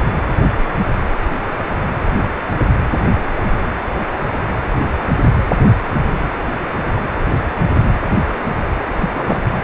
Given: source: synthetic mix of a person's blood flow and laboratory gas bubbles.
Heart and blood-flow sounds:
Doppler ultrasound of blood flow; precordium
9.01-9.09 s: bubbles
9.14-9.46 s: bubbles
From the record:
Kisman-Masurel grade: 212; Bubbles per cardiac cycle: several, 3 to 8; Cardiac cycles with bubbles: 1 to 10%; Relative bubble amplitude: moderate (0.250 to 0.450); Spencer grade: 1 (occasional bubble signal discernible with the cardiac motion signal, with majority of cardiac periods free of bubbles); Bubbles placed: anywhere in the cardiac cycle

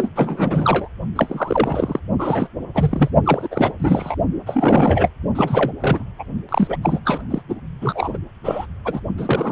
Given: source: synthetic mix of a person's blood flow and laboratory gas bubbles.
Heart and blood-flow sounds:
Doppler ultrasound of blood flow; precordium
0.00-0.11 s: bubbles
0.15-0.88 s: bubbles
1.16-2.00 s: bubbles
2.19-2.48 s: bubbles
2.75-3.10 s: bubbles
3.24-3.48 s: bubbles
3.50-3.73 s: bubbles
3.79-4.15 s: bubbles
4.46-5.10 s: bubbles
5.35-5.72 s: bubbles
5.80-6.04 s: bubbles
6.18-6.24 s: bubbles
6.48-6.77 s: bubbles
6.82-7.00 s: bubbles
7.05-7.21 s: bubbles
7.30-7.42 s: bubbles
7.48-7.55 s: bubbles
7.81-8.17 s: bubbles
8.44-8.66 s: bubbles
8.85-9.00 s: bubbles
9.18-9.52 s: bubbles
From the record:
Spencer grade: 3 (all of the cardiac periods contain showers or single bubble signals, but not dominating or overriding the cardiac motion signals); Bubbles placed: only in the low amplitude regions of the cardiac cycle

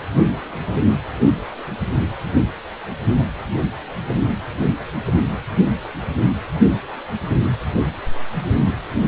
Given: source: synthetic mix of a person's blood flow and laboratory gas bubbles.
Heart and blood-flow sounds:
Doppler ultrasound of blood flow; precordium
no bubbles
From the record:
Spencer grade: 0 (complete lack of bubble signals)

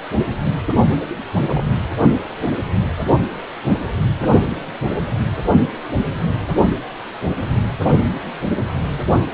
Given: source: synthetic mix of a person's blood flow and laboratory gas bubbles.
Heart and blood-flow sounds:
Doppler ultrasound of blood flow; precordium
1.37-1.61 s: bubbles
4.91-5.04 s: bubbles
From the record:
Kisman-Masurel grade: 121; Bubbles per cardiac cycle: 1 to 2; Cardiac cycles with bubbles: 10 to 50%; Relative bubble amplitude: barely perceptible (0.100 to 0.250); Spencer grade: 2 (many but less than half of the cardiac periods contain bubble signals, singularly or in groups); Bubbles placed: only in the low amplitude regions of the cardiac cycle

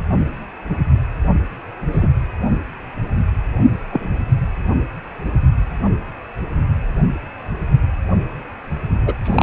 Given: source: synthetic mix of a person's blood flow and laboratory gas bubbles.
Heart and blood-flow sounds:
Doppler ultrasound of blood flow; precordium
1.92-2.08 s: bubbles
3.90-4.11 s: bubbles
9.06-9.13 s: bubbles
9.24-9.43 s: bubbles
From the record:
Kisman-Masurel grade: 123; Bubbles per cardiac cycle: 1 to 2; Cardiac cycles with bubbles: 10 to 50%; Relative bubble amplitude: loud (0.450 to 0.775); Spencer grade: 2 (many but less than half of the cardiac periods contain bubble signals, singularly or in groups); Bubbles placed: anywhere in the cardiac cycle

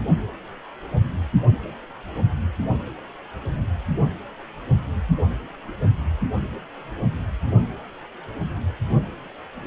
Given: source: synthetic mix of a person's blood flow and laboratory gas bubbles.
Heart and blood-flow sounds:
Doppler ultrasound of blood flow; precordium
no bubbles
From the record:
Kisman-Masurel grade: 000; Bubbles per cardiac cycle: 0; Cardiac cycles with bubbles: 0%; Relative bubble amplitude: no bubbles discernible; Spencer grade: 0 (complete lack of bubble signals)

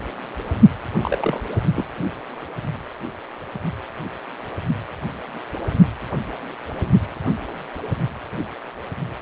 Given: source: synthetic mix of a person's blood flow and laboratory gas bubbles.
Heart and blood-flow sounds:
Doppler ultrasound of blood flow; precordium
1.01-1.43 s: bubbles
1.76-1.84 s: bubbles
From the record:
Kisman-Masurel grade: 112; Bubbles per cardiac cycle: 1 to 2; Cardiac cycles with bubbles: 1 to 10%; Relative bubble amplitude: moderate (0.250 to 0.450); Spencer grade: 1 (occasional bubble signal discernible with the cardiac motion signal, with majority of cardiac periods free of bubbles); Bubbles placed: only in the low amplitude regions of the cardiac cycle

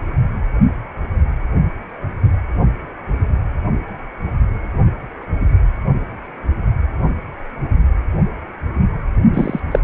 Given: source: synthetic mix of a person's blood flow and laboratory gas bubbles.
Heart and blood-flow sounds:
Doppler ultrasound of blood flow; precordium
9.34-9.60 s: bubbles
9.71-9.79 s: bubbles
From the record:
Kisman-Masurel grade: 123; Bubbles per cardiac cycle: 1 to 2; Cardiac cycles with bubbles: 10 to 50%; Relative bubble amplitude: loud (0.450 to 0.775); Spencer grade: 2 (many but less than half of the cardiac periods contain bubble signals, singularly or in groups); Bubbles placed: only in the low amplitude regions of the cardiac cycle

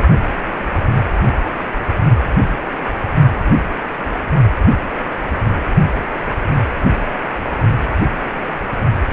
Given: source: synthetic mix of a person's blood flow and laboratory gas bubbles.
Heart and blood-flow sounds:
Doppler ultrasound of blood flow; precordium
0.00-0.03 s: bubbles
From the record:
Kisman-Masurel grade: 212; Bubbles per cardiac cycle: several, 3 to 8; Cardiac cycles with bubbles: 1 to 10%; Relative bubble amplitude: moderate (0.250 to 0.450); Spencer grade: 1 (occasional bubble signal discernible with the cardiac motion signal, with majority of cardiac periods free of bubbles); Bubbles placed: only in the low amplitude regions of the cardiac cycle

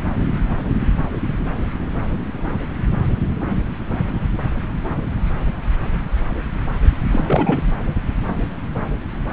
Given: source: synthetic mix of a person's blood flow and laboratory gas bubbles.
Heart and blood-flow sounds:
Doppler ultrasound of blood flow; subclavian vein
7.11-7.62 s: bubbles
From the record:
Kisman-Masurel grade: 212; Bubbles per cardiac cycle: several, 3 to 8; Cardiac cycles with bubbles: 1 to 10%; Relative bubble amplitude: moderate (0.250 to 0.450); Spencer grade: 1 (occasional bubble signal discernible with the cardiac motion signal, with majority of cardiac periods free of bubbles); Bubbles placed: anywhere in the cardiac cycle

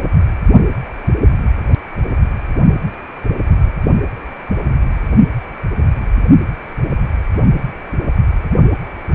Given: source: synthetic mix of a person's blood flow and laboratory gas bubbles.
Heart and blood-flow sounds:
Doppler ultrasound of blood flow; precordium
no bubbles
From the record:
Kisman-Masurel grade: 000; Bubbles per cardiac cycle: 0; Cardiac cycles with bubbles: 0%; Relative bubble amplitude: no bubbles discernible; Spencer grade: 0 (complete lack of bubble signals)

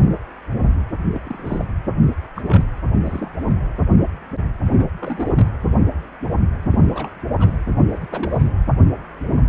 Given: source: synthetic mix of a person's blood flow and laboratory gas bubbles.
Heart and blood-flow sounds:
Doppler ultrasound of blood flow; precordium
1.13-1.21 s: bubbles
1.25-1.65 s: bubbles
2.35-2.42 s: bubbles
2.48-2.64 s: bubbles
3.05-3.30 s: bubbles
3.38-3.55 s: bubbles
4.75-4.90 s: bubbles
4.99-5.51 s: bubbles
6.71-6.88 s: bubbles
6.93-7.10 s: bubbles
7.39-7.52 s: bubbles
7.90-7.98 s: bubbles
8.01-8.06 s: bubbles
8.12-8.50 s: bubbles
From the record:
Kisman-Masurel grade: 221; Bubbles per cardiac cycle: several, 3 to 8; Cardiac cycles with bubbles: 10 to 50%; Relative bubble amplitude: barely perceptible (0.100 to 0.250); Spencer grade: 2 (many but less than half of the cardiac periods contain bubble signals, singularly or in groups); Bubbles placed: anywhere in the cardiac cycle

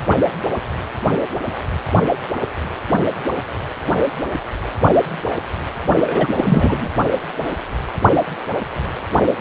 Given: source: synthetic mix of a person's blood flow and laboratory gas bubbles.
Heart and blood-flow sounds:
Doppler ultrasound of blood flow; precordium
6.07-6.88 s: bubbles
From the record:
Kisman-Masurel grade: 213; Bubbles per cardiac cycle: several, 3 to 8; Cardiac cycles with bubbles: 1 to 10%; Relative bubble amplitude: loud (0.450 to 0.775); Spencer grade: 1 (occasional bubble signal discernible with the cardiac motion signal, with majority of cardiac periods free of bubbles); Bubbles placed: only in the low amplitude regions of the cardiac cycle

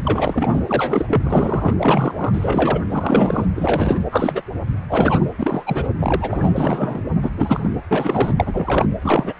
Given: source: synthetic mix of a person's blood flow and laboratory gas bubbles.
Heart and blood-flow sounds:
Doppler ultrasound of blood flow; precordium
0.04-0.60 s: bubbles
0.66-1.73 s: bubbles
1.78-2.82 s: bubbles
2.89-3.46 s: bubbles
3.55-4.00 s: bubbles
4.11-4.42 s: bubbles
4.89-5.24 s: bubbles
5.38-5.63 s: bubbles
5.66-5.88 s: bubbles
5.99-6.53 s: bubbles
6.56-7.01 s: bubbles
7.22-7.30 s: bubbles
7.37-7.70 s: bubbles
7.91-8.35 s: bubbles
8.37-8.87 s: bubbles
9.02-9.34 s: bubbles
From the record:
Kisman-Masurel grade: 333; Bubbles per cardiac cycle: rolling drumbeat, 9 or more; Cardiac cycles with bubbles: 50 to 99%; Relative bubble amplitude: loud (0.450 to 0.775); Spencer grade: 3 (all of the cardiac periods contain showers or single bubble signals, but not dominating or overriding the cardiac motion signals); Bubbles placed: anywhere in the cardiac cycle

